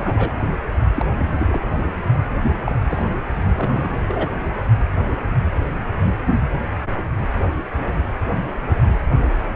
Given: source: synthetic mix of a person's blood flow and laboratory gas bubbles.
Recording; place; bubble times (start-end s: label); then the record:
Doppler ultrasound of blood flow; precordium
0.00-0.33 s: bubbles
0.94-1.05 s: bubbles
1.17-1.68 s: bubbles
1.72-1.85 s: bubbles
2.42-2.72 s: bubbles
2.89-3.05 s: bubbles
3.54-3.99 s: bubbles
4.08-4.32 s: bubbles
From the record:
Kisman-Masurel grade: 232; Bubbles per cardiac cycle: several, 3 to 8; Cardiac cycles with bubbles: 50 to 99%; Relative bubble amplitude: moderate (0.250 to 0.450); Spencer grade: 3 (all of the cardiac periods contain showers or single bubble signals, but not dominating or overriding the cardiac motion signals); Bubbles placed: only in the low amplitude regions of the cardiac cycle